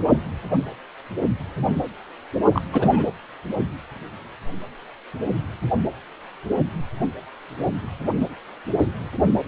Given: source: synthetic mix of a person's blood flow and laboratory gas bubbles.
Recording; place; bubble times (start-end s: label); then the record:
Doppler ultrasound of blood flow; precordium
2.53-2.61 s: bubbles
2.72-3.11 s: bubbles
From the record:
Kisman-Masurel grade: 212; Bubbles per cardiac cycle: several, 3 to 8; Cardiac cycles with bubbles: 1 to 10%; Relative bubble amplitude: moderate (0.250 to 0.450); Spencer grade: 1 (occasional bubble signal discernible with the cardiac motion signal, with majority of cardiac periods free of bubbles); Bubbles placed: only in the low amplitude regions of the cardiac cycle